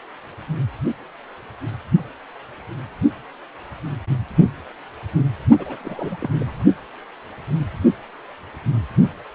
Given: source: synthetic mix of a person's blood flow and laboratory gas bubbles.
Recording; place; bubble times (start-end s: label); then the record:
Doppler ultrasound of blood flow; precordium
5.58-5.77 s: bubbles
5.83-6.16 s: bubbles
6.19-6.30 s: bubbles
6.36-6.65 s: bubbles
From the record:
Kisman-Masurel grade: 211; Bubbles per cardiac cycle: several, 3 to 8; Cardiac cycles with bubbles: 1 to 10%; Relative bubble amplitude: barely perceptible (0.100 to 0.250); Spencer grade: 1 (occasional bubble signal discernible with the cardiac motion signal, with majority of cardiac periods free of bubbles); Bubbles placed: only in the low amplitude regions of the cardiac cycle